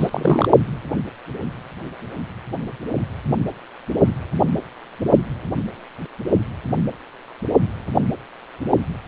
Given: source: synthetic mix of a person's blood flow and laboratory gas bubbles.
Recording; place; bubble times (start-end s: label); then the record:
Doppler ultrasound of blood flow; precordium
0.00-0.48 s: bubbles
From the record:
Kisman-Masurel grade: 212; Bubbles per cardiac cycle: several, 3 to 8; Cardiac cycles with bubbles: 1 to 10%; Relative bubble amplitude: moderate (0.250 to 0.450); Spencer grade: 1 (occasional bubble signal discernible with the cardiac motion signal, with majority of cardiac periods free of bubbles); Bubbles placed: only in the low amplitude regions of the cardiac cycle